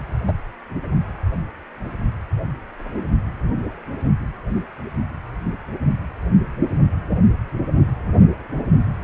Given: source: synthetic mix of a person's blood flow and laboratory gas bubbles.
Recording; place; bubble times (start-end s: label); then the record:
Doppler ultrasound of blood flow; precordium
0.27-0.32 s: bubbles
From the record:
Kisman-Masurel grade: 123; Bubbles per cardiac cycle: 1 to 2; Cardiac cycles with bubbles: 10 to 50%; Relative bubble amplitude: loud (0.450 to 0.775); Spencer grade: 2 (many but less than half of the cardiac periods contain bubble signals, singularly or in groups); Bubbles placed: only in the low amplitude regions of the cardiac cycle